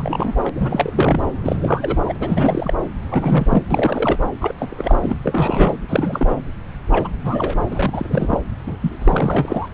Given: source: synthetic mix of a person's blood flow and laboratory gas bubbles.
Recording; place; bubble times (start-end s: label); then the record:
Doppler ultrasound of blood flow; subclavian vein
0.00-0.34 s: bubbles
0.43-0.49 s: bubbles
0.54-1.21 s: bubbles
1.43-1.56 s: bubbles
1.62-1.97 s: bubbles
2.05-2.17 s: bubbles
2.20-2.74 s: bubbles
3.07-3.63 s: bubbles
3.71-4.17 s: bubbles
4.41-4.54 s: bubbles
4.58-5.14 s: bubbles
5.24-5.77 s: bubbles
5.88-6.36 s: bubbles
6.91-7.09 s: bubbles
7.23-7.55 s: bubbles
7.71-7.91 s: bubbles
7.93-8.40 s: bubbles
8.66-8.78 s: bubbles
8.81-8.98 s: bubbles
9.01-9.68 s: bubbles
From the record:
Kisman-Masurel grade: 342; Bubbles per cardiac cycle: rolling drumbeat, 9 or more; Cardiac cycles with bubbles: 100%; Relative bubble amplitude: moderate (0.250 to 0.450); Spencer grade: 3 (all of the cardiac periods contain showers or single bubble signals, but not dominating or overriding the cardiac motion signals); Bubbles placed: anywhere in the cardiac cycle